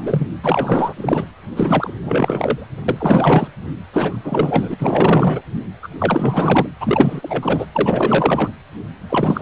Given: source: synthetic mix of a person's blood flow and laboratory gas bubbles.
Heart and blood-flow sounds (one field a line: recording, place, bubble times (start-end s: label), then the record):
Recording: Doppler ultrasound of blood flow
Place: precordium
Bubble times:
0.00-0.28 s: bubbles
0.42-0.93 s: bubbles
0.96-1.25 s: bubbles
1.56-1.94 s: bubbles
2.02-2.67 s: bubbles
2.88-3.48 s: bubbles
3.93-4.20 s: bubbles
4.23-4.74 s: bubbles
4.79-5.41 s: bubbles
5.83-5.89 s: bubbles
5.99-6.67 s: bubbles
6.80-7.66 s: bubbles
7.72-8.51 s: bubbles
9.09-9.41 s: bubbles
From the record:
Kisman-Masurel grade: 444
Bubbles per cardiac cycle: continuous sound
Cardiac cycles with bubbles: 100%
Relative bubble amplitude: maximal (0.775 to 0.999)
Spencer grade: 4 (maximum detectable bubble signal sounding continuously throughout systole and diastole of every cardiac period, and overriding the amplitude of the normal cardiac signals)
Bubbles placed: anywhere in the cardiac cycle